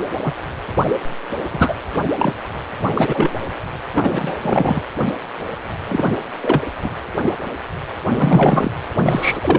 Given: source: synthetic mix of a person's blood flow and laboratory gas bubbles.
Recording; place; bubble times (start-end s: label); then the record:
Doppler ultrasound of blood flow; precordium
0.24-0.32 s: bubbles
1.51-1.74 s: bubbles
1.96-2.02 s: bubbles
2.19-2.33 s: bubbles
2.95-3.40 s: bubbles
3.93-4.37 s: bubbles
4.42-4.81 s: bubbles
5.88-6.12 s: bubbles
6.42-6.61 s: bubbles
6.83-6.90 s: bubbles
8.14-8.71 s: bubbles
9.05-9.58 s: bubbles
From the record:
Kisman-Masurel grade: 233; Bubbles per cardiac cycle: several, 3 to 8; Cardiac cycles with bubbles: 50 to 99%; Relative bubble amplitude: loud (0.450 to 0.775); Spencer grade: 3 (all of the cardiac periods contain showers or single bubble signals, but not dominating or overriding the cardiac motion signals); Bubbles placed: anywhere in the cardiac cycle